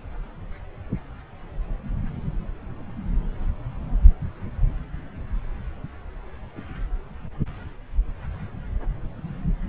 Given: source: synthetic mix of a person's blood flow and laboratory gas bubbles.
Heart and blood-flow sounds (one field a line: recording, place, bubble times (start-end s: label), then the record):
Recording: Doppler ultrasound of blood flow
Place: subclavian vein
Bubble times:
no bubbles
From the record:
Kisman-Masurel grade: 000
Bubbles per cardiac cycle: 0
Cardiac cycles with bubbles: 0%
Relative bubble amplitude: no bubbles discernible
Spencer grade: 0 (complete lack of bubble signals)